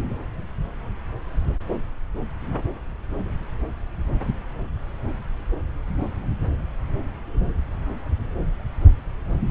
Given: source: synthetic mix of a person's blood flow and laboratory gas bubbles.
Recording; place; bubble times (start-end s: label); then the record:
Doppler ultrasound of blood flow; subclavian vein
no bubbles
From the record:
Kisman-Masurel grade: 000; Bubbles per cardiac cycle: 0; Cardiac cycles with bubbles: 0%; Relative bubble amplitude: no bubbles discernible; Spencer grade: 0 (complete lack of bubble signals)